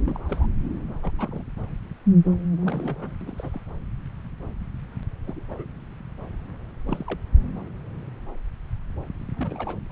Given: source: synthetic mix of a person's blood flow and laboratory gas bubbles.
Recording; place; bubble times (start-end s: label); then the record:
Doppler ultrasound of blood flow; subclavian vein
0.05-0.18 s: bubbles
0.25-0.47 s: bubbles
1.03-1.15 s: bubbles
1.18-1.43 s: bubbles
2.62-3.17 s: bubbles
3.21-3.60 s: bubbles
5.27-5.65 s: bubbles
6.87-7.19 s: bubbles
9.34-9.79 s: bubbles
9.89-9.92 s: bubbles
From the record:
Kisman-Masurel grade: 221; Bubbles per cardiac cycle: several, 3 to 8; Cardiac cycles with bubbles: 10 to 50%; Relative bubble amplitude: barely perceptible (0.100 to 0.250); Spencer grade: 2 (many but less than half of the cardiac periods contain bubble signals, singularly or in groups); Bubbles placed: anywhere in the cardiac cycle